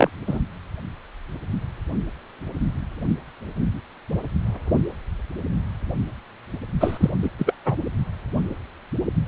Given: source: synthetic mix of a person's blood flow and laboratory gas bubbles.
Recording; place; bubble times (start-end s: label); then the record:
Doppler ultrasound of blood flow; precordium
0.00-0.10 s: bubbles
0.27-0.39 s: bubbles
6.80-7.10 s: bubbles
7.23-7.29 s: bubbles
7.39-7.54 s: bubbles
7.66-7.77 s: bubbles
From the record:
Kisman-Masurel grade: 223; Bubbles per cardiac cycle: several, 3 to 8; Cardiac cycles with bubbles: 10 to 50%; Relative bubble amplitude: loud (0.450 to 0.775); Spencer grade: 2 (many but less than half of the cardiac periods contain bubble signals, singularly or in groups); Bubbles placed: only in the low amplitude regions of the cardiac cycle